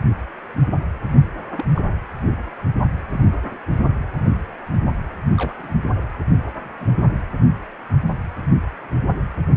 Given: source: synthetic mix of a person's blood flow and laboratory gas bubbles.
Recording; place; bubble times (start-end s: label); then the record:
Doppler ultrasound of blood flow; precordium
1.57-1.65 s: bubbles
1.76-1.82 s: bubbles
3.10-3.21 s: bubbles
3.42-3.60 s: bubbles
4.19-4.41 s: bubbles
5.37-5.53 s: bubbles
5.58-5.75 s: bubbles
6.79-6.94 s: bubbles
From the record:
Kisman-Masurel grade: 121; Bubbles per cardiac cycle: 1 to 2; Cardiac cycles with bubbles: 10 to 50%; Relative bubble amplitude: barely perceptible (0.100 to 0.250); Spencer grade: 2 (many but less than half of the cardiac periods contain bubble signals, singularly or in groups); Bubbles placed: only in the low amplitude regions of the cardiac cycle